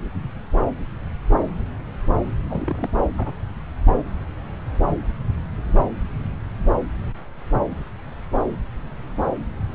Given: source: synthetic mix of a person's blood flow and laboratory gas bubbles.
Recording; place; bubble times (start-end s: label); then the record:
Doppler ultrasound of blood flow; subclavian vein
2.49-2.90 s: bubbles
3.17-3.33 s: bubbles
From the record:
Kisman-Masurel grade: 121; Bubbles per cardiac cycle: 1 to 2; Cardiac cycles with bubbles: 10 to 50%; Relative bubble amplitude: barely perceptible (0.100 to 0.250); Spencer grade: 2 (many but less than half of the cardiac periods contain bubble signals, singularly or in groups); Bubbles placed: anywhere in the cardiac cycle